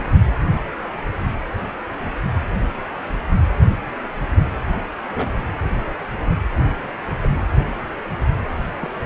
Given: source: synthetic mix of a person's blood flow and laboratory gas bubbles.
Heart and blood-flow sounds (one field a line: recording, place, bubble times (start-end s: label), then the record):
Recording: Doppler ultrasound of blood flow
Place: precordium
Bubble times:
5.14-5.31 s: bubbles
6.64-6.88 s: bubbles
7.23-7.28 s: bubbles
8.81-8.90 s: bubbles
From the record:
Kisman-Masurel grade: 121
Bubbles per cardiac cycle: 1 to 2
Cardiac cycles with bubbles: 10 to 50%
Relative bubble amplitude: barely perceptible (0.100 to 0.250)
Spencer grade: 2 (many but less than half of the cardiac periods contain bubble signals, singularly or in groups)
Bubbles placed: anywhere in the cardiac cycle